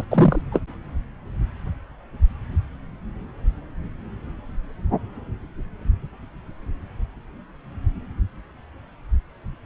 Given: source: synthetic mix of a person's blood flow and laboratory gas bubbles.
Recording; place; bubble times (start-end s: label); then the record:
Doppler ultrasound of blood flow; subclavian vein
0.00-0.05 s: bubbles
0.11-0.41 s: bubbles
0.52-0.60 s: bubbles
From the record:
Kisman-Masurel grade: 223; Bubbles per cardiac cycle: several, 3 to 8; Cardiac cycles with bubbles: 10 to 50%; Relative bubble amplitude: loud (0.450 to 0.775); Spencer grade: 2 (many but less than half of the cardiac periods contain bubble signals, singularly or in groups); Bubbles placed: anywhere in the cardiac cycle